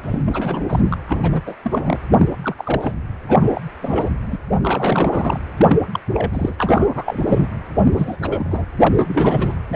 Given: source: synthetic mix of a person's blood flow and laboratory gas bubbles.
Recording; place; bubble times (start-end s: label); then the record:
Doppler ultrasound of blood flow; precordium
0.02-0.96 s: bubbles
1.08-1.42 s: bubbles
1.46-1.55 s: bubbles
1.63-1.99 s: bubbles
2.17-2.34 s: bubbles
2.44-2.55 s: bubbles
2.58-2.94 s: bubbles
3.28-3.61 s: bubbles
3.82-4.10 s: bubbles
4.25-4.37 s: bubbles
4.62-5.39 s: bubbles
5.57-5.76 s: bubbles
5.93-6.00 s: bubbles
6.14-6.55 s: bubbles
6.58-6.92 s: bubbles
6.95-7.47 s: bubbles
7.79-7.84 s: bubbles
7.92-8.17 s: bubbles
8.22-8.65 s: bubbles
8.79-9.55 s: bubbles
9.70-9.76 s: bubbles
From the record:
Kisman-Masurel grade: 342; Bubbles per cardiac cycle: rolling drumbeat, 9 or more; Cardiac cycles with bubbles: 100%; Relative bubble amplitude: moderate (0.250 to 0.450); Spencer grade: 3 (all of the cardiac periods contain showers or single bubble signals, but not dominating or overriding the cardiac motion signals); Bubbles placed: anywhere in the cardiac cycle